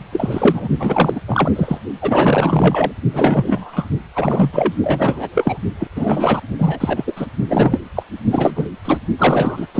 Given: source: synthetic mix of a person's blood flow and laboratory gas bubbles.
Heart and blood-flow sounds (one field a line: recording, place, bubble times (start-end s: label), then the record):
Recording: Doppler ultrasound of blood flow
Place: precordium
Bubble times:
0.12-0.68 s: bubbles
0.78-1.20 s: bubbles
1.28-1.51 s: bubbles
1.55-1.78 s: bubbles
2.01-2.92 s: bubbles
3.12-3.86 s: bubbles
4.15-4.74 s: bubbles
4.83-5.29 s: bubbles
5.35-5.58 s: bubbles
5.79-5.87 s: bubbles
5.96-6.41 s: bubbles
6.58-7.12 s: bubbles
7.16-7.27 s: bubbles
7.48-7.81 s: bubbles
7.96-8.03 s: bubbles
8.30-8.68 s: bubbles
8.85-8.97 s: bubbles
9.18-9.68 s: bubbles
9.75-9.80 s: bubbles
From the record:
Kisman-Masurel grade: 343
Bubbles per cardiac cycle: rolling drumbeat, 9 or more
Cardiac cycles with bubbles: 100%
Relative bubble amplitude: loud (0.450 to 0.775)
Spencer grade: 3 (all of the cardiac periods contain showers or single bubble signals, but not dominating or overriding the cardiac motion signals)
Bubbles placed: only in the low amplitude regions of the cardiac cycle